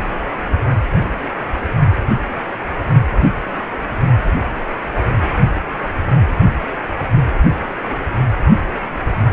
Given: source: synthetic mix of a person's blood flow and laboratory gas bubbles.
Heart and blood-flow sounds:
Doppler ultrasound of blood flow; precordium
no bubbles
From the record:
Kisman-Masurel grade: 000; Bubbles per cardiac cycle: 0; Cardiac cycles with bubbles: 0%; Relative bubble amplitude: no bubbles discernible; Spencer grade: 0 (complete lack of bubble signals)

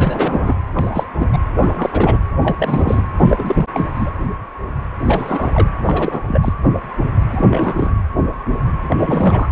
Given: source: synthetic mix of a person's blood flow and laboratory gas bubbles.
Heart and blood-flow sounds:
Doppler ultrasound of blood flow; precordium
0.00-0.58 s: bubbles
0.74-1.05 s: bubbles
1.20-1.28 s: bubbles
1.33-1.38 s: bubbles
1.56-1.90 s: bubbles
1.92-2.18 s: bubbles
2.42-3.02 s: bubbles
3.20-3.67 s: bubbles
3.74-3.89 s: bubbles
3.95-4.11 s: bubbles
5.04-5.67 s: bubbles
5.85-6.22 s: bubbles
6.28-6.53 s: bubbles
7.30-7.46 s: bubbles
7.49-7.95 s: bubbles
8.88-9.49 s: bubbles
From the record:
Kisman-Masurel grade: 332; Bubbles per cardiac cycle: rolling drumbeat, 9 or more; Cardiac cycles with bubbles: 50 to 99%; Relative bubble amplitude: moderate (0.250 to 0.450); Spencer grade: 3 (all of the cardiac periods contain showers or single bubble signals, but not dominating or overriding the cardiac motion signals); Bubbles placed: anywhere in the cardiac cycle

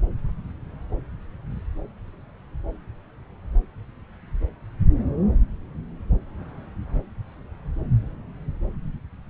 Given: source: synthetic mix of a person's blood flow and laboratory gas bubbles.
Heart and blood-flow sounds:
Doppler ultrasound of blood flow; subclavian vein
no bubbles
From the record:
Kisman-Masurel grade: 000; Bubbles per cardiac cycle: 0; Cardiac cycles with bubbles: 0%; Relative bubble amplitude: no bubbles discernible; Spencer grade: 0 (complete lack of bubble signals)

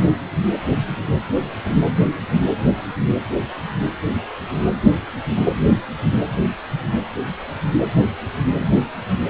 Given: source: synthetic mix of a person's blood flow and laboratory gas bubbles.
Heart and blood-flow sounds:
Doppler ultrasound of blood flow; precordium
no bubbles
From the record:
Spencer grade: 0 (complete lack of bubble signals)

